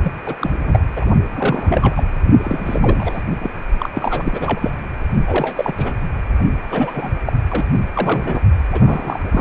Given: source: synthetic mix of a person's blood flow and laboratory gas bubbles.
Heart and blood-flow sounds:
Doppler ultrasound of blood flow; precordium
0.01-0.12 s: bubbles
0.25-0.35 s: bubbles
0.39-0.58 s: bubbles
0.64-0.79 s: bubbles
0.96-1.05 s: bubbles
1.31-2.03 s: bubbles
2.42-3.22 s: bubbles
3.39-3.50 s: bubbles
3.78-3.90 s: bubbles
3.92-4.71 s: bubbles
5.27-5.72 s: bubbles
5.78-5.94 s: bubbles
6.70-7.09 s: bubbles
7.26-7.33 s: bubbles
7.49-7.65 s: bubbles
7.93-8.41 s: bubbles
8.72-9.21 s: bubbles
9.31-9.41 s: bubbles
From the record:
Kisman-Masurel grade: 332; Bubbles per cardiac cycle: rolling drumbeat, 9 or more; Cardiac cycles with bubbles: 50 to 99%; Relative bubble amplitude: moderate (0.250 to 0.450); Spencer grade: 3 (all of the cardiac periods contain showers or single bubble signals, but not dominating or overriding the cardiac motion signals); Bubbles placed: only in the low amplitude regions of the cardiac cycle

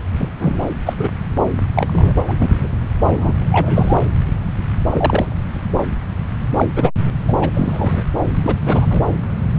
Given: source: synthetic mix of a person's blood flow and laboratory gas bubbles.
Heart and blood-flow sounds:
Doppler ultrasound of blood flow; subclavian vein
0.14-0.29 s: bubbles
0.39-0.74 s: bubbles
0.85-0.94 s: bubbles
0.98-1.08 s: bubbles
1.75-2.15 s: bubbles
2.26-2.34 s: bubbles
2.40-2.68 s: bubbles
3.04-3.34 s: bubbles
3.51-3.96 s: bubbles
4.90-5.27 s: bubbles
6.56-6.66 s: bubbles
6.76-6.91 s: bubbles
7.28-7.38 s: bubbles
7.41-7.50 s: bubbles
7.54-8.03 s: bubbles
8.42-8.54 s: bubbles
8.65-8.86 s: bubbles
8.90-9.01 s: bubbles
From the record:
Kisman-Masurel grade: 232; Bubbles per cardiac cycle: several, 3 to 8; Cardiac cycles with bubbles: 50 to 99%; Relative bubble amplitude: moderate (0.250 to 0.450); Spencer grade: 3 (all of the cardiac periods contain showers or single bubble signals, but not dominating or overriding the cardiac motion signals); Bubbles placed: anywhere in the cardiac cycle

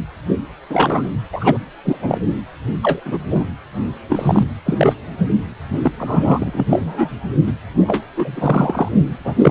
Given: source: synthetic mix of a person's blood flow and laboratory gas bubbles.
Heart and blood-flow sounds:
Doppler ultrasound of blood flow; precordium
0.70-1.02 s: bubbles
1.32-1.57 s: bubbles
1.84-1.98 s: bubbles
2.01-2.20 s: bubbles
2.83-3.00 s: bubbles
3.05-3.18 s: bubbles
3.30-3.45 s: bubbles
4.09-4.43 s: bubbles
4.65-4.93 s: bubbles
5.83-5.92 s: bubbles
5.98-6.66 s: bubbles
6.70-7.10 s: bubbles
7.46-7.52 s: bubbles
7.87-8.04 s: bubbles
8.17-8.88 s: bubbles
9.20-9.51 s: bubbles
From the record:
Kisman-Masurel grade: 233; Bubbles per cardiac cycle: several, 3 to 8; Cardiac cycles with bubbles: 50 to 99%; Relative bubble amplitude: loud (0.450 to 0.775); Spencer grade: 3 (all of the cardiac periods contain showers or single bubble signals, but not dominating or overriding the cardiac motion signals); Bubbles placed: anywhere in the cardiac cycle

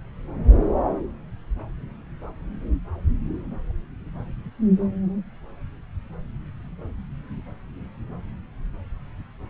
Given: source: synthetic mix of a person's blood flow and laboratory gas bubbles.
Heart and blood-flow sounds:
Doppler ultrasound of blood flow; subclavian vein
no bubbles
From the record:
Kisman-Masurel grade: 000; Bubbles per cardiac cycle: 0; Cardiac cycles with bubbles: 0%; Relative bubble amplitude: no bubbles discernible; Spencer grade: 0 (complete lack of bubble signals)

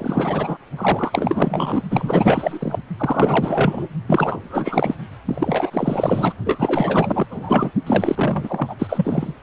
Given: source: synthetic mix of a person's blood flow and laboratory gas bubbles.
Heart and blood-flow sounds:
Doppler ultrasound of blood flow; precordium
0.00-0.57 s: bubbles
0.77-1.82 s: bubbles
1.90-2.77 s: bubbles
2.98-3.88 s: bubbles
4.07-4.95 s: bubbles
5.25-6.34 s: bubbles
6.45-7.26 s: bubbles
7.30-7.71 s: bubbles
7.87-9.35 s: bubbles
From the record:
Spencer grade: 4 (maximum detectable bubble signal sounding continuously throughout systole and diastole of every cardiac period, and overriding the amplitude of the normal cardiac signals); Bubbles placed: only in the low amplitude regions of the cardiac cycle

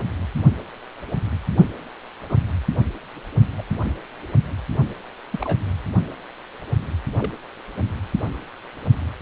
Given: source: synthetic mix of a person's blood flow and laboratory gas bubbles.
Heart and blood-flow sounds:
Doppler ultrasound of blood flow; precordium
2.29-2.36 s: bubbles
3.57-3.62 s: bubbles
5.31-5.57 s: bubbles
7.17-7.33 s: bubbles
7.77-7.82 s: bubbles
From the record:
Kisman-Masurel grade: 121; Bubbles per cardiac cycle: 1 to 2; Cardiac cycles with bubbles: 10 to 50%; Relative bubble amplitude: barely perceptible (0.100 to 0.250); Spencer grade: 2 (many but less than half of the cardiac periods contain bubble signals, singularly or in groups); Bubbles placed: anywhere in the cardiac cycle

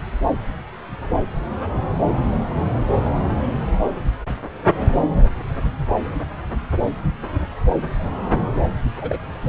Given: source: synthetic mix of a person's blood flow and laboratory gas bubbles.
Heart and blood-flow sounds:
Doppler ultrasound of blood flow; subclavian vein
9.01-9.19 s: bubbles
9.41-9.49 s: bubbles
From the record:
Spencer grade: 1 (occasional bubble signal discernible with the cardiac motion signal, with majority of cardiac periods free of bubbles); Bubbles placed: anywhere in the cardiac cycle

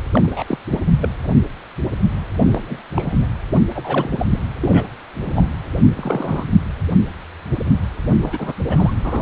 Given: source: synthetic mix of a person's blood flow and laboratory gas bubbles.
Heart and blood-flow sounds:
Doppler ultrasound of blood flow; precordium
0.13-0.57 s: bubbles
0.70-0.80 s: bubbles
1.01-1.09 s: bubbles
2.41-2.82 s: bubbles
2.96-3.27 s: bubbles
3.75-4.26 s: bubbles
4.29-4.39 s: bubbles
4.60-4.86 s: bubbles
5.25-5.54 s: bubbles
5.96-6.45 s: bubbles
8.22-8.53 s: bubbles
8.69-8.94 s: bubbles
9.04-9.22 s: bubbles
From the record:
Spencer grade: 3 (all of the cardiac periods contain showers or single bubble signals, but not dominating or overriding the cardiac motion signals); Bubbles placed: anywhere in the cardiac cycle

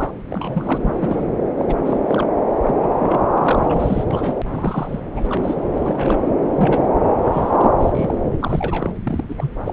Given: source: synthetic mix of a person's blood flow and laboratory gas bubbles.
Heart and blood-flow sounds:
Doppler ultrasound of blood flow; subclavian vein
0.00-0.10 s: bubbles
0.30-1.25 s: bubbles
1.57-1.76 s: bubbles
1.85-2.00 s: bubbles
2.06-2.27 s: bubbles
2.64-2.75 s: bubbles
2.83-2.90 s: bubbles
3.00-3.29 s: bubbles
3.34-4.04 s: bubbles
4.10-4.35 s: bubbles
4.50-5.00 s: bubbles
5.16-5.75 s: bubbles
5.86-6.18 s: bubbles
6.48-6.88 s: bubbles
7.24-7.71 s: bubbles
7.79-8.32 s: bubbles
8.39-8.92 s: bubbles
9.03-9.24 s: bubbles
9.29-9.35 s: bubbles
9.38-9.51 s: bubbles
9.65-9.73 s: bubbles
From the record:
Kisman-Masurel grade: 242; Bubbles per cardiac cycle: several, 3 to 8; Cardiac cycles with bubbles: 100%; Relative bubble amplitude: moderate (0.250 to 0.450); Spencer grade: 3 (all of the cardiac periods contain showers or single bubble signals, but not dominating or overriding the cardiac motion signals); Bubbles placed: anywhere in the cardiac cycle

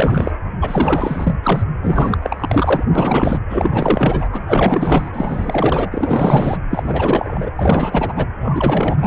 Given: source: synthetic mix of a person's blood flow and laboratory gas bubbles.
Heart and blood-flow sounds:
Doppler ultrasound of blood flow; precordium
0.00-0.32 s: bubbles
0.61-1.35 s: bubbles
1.43-1.63 s: bubbles
1.82-2.17 s: bubbles
2.22-2.83 s: bubbles
2.95-3.39 s: bubbles
3.50-4.29 s: bubbles
4.33-6.58 s: bubbles
6.71-7.50 s: bubbles
7.56-8.26 s: bubbles
8.40-9.06 s: bubbles
From the record:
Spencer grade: 4 (maximum detectable bubble signal sounding continuously throughout systole and diastole of every cardiac period, and overriding the amplitude of the normal cardiac signals); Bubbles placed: anywhere in the cardiac cycle

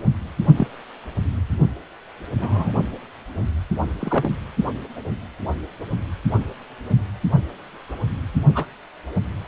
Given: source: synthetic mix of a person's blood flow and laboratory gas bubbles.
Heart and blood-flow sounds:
Doppler ultrasound of blood flow; precordium
0.57-0.67 s: bubbles
2.38-2.71 s: bubbles
3.99-4.29 s: bubbles
8.54-8.65 s: bubbles
From the record:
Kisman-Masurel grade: 122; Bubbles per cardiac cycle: 1 to 2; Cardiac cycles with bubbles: 10 to 50%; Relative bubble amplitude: moderate (0.250 to 0.450); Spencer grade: 2 (many but less than half of the cardiac periods contain bubble signals, singularly or in groups); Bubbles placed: only in the low amplitude regions of the cardiac cycle

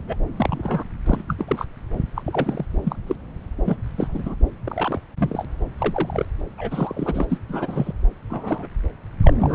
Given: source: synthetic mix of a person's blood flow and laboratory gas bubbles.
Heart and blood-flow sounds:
Doppler ultrasound of blood flow; subclavian vein
0.08-0.15 s: bubbles
0.37-0.84 s: bubbles
1.06-1.23 s: bubbles
1.28-1.35 s: bubbles
1.38-1.66 s: bubbles
2.15-2.22 s: bubbles
2.26-2.66 s: bubbles
2.83-2.96 s: bubbles
3.06-3.16 s: bubbles
3.65-3.76 s: bubbles
3.96-4.35 s: bubbles
4.64-5.00 s: bubbles
5.17-5.45 s: bubbles
5.78-6.25 s: bubbles
6.58-7.25 s: bubbles
7.29-7.38 s: bubbles
7.49-7.93 s: bubbles
8.30-8.68 s: bubbles
9.22-9.34 s: bubbles
9.39-9.54 s: bubbles
From the record:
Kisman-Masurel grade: 242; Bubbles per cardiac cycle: several, 3 to 8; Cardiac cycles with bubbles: 100%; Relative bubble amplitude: moderate (0.250 to 0.450); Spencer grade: 3 (all of the cardiac periods contain showers or single bubble signals, but not dominating or overriding the cardiac motion signals); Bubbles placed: anywhere in the cardiac cycle

